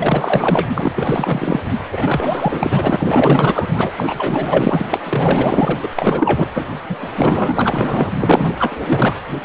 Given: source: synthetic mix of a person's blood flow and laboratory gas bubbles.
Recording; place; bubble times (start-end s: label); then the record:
Doppler ultrasound of blood flow; precordium
0.00-0.67 s: bubbles
0.75-1.60 s: bubbles
1.92-3.92 s: bubbles
3.97-4.84 s: bubbles
4.91-5.01 s: bubbles
5.04-5.79 s: bubbles
5.82-5.89 s: bubbles
5.96-6.47 s: bubbles
6.54-6.66 s: bubbles
6.89-8.12 s: bubbles
8.19-8.53 s: bubbles
8.59-9.16 s: bubbles
9.43-9.45 s: bubbles
From the record:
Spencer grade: 4 (maximum detectable bubble signal sounding continuously throughout systole and diastole of every cardiac period, and overriding the amplitude of the normal cardiac signals); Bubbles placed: anywhere in the cardiac cycle